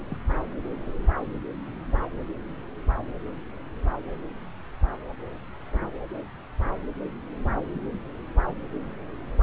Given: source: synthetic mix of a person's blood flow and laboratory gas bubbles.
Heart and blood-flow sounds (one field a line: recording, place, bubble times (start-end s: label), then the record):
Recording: Doppler ultrasound of blood flow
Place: subclavian vein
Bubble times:
0.10-0.18 s: bubbles
From the record:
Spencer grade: 2 (many but less than half of the cardiac periods contain bubble signals, singularly or in groups)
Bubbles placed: anywhere in the cardiac cycle